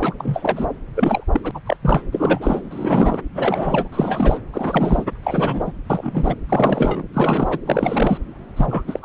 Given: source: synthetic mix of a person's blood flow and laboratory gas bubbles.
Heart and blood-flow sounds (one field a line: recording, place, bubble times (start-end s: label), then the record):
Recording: Doppler ultrasound of blood flow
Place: subclavian vein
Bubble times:
0.00-0.14 s: bubbles
0.20-0.69 s: bubbles
0.95-1.24 s: bubbles
1.31-1.41 s: bubbles
1.44-1.51 s: bubbles
1.54-1.60 s: bubbles
1.66-1.77 s: bubbles
1.83-2.02 s: bubbles
2.12-2.62 s: bubbles
2.71-3.19 s: bubbles
3.35-3.88 s: bubbles
3.92-4.39 s: bubbles
4.53-5.04 s: bubbles
5.23-5.71 s: bubbles
5.90-6.35 s: bubbles
6.49-7.03 s: bubbles
7.13-7.58 s: bubbles
7.66-8.18 s: bubbles
8.56-8.82 s: bubbles
8.88-9.05 s: bubbles
From the record:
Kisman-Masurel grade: 342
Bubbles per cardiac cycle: rolling drumbeat, 9 or more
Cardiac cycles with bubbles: 100%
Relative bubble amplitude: moderate (0.250 to 0.450)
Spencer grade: 3 (all of the cardiac periods contain showers or single bubble signals, but not dominating or overriding the cardiac motion signals)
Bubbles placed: anywhere in the cardiac cycle